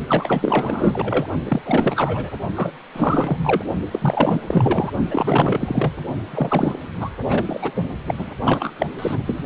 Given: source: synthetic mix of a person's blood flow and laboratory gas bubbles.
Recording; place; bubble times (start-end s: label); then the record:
Doppler ultrasound of blood flow; precordium
0.08-1.26 s: bubbles
1.46-1.61 s: bubbles
1.65-2.34 s: bubbles
2.56-2.72 s: bubbles
2.94-3.38 s: bubbles
3.43-3.64 s: bubbles
3.91-4.41 s: bubbles
4.46-4.92 s: bubbles
5.10-5.91 s: bubbles
6.30-6.78 s: bubbles
7.00-7.09 s: bubbles
7.25-7.71 s: bubbles
8.07-8.15 s: bubbles
8.17-8.31 s: bubbles
8.44-8.73 s: bubbles
8.78-8.86 s: bubbles
8.99-9.43 s: bubbles
From the record:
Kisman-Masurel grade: 444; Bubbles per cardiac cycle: continuous sound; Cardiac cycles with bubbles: 100%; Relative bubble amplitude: maximal (0.775 to 0.999); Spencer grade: 4 (maximum detectable bubble signal sounding continuously throughout systole and diastole of every cardiac period, and overriding the amplitude of the normal cardiac signals); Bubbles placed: only in the low amplitude regions of the cardiac cycle